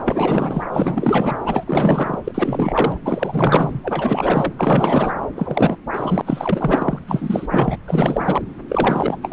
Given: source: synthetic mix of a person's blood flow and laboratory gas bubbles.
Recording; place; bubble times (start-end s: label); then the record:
Doppler ultrasound of blood flow; subclavian vein
0.05-0.65 s: bubbles
0.73-1.37 s: bubbles
1.46-2.19 s: bubbles
2.24-3.00 s: bubbles
3.04-3.81 s: bubbles
3.83-4.53 s: bubbles
4.59-5.14 s: bubbles
5.36-5.78 s: bubbles
5.93-6.21 s: bubbles
6.25-6.98 s: bubbles
7.06-7.47 s: bubbles
7.50-7.78 s: bubbles
7.87-8.42 s: bubbles
8.68-9.17 s: bubbles
9.21-9.33 s: bubbles
From the record:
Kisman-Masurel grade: 444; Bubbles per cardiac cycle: continuous sound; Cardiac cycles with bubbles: 100%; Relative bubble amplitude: maximal (0.775 to 0.999); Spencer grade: 4 (maximum detectable bubble signal sounding continuously throughout systole and diastole of every cardiac period, and overriding the amplitude of the normal cardiac signals); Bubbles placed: anywhere in the cardiac cycle